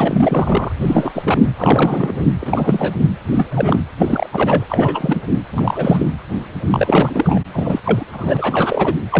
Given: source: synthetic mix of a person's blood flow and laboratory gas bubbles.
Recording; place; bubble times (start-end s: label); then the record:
Doppler ultrasound of blood flow; precordium
0.00-0.72 s: bubbles
0.81-1.11 s: bubbles
1.15-1.40 s: bubbles
1.58-2.22 s: bubbles
2.41-2.96 s: bubbles
3.31-3.46 s: bubbles
3.50-3.79 s: bubbles
3.99-4.29 s: bubbles
4.33-4.65 s: bubbles
4.70-5.21 s: bubbles
5.50-6.10 s: bubbles
6.71-7.40 s: bubbles
7.52-7.80 s: bubbles
7.84-8.05 s: bubbles
8.13-8.95 s: bubbles
9.11-9.20 s: bubbles
From the record:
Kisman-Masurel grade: 342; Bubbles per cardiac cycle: rolling drumbeat, 9 or more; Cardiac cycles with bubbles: 100%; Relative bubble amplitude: moderate (0.250 to 0.450); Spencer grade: 3 (all of the cardiac periods contain showers or single bubble signals, but not dominating or overriding the cardiac motion signals); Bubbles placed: anywhere in the cardiac cycle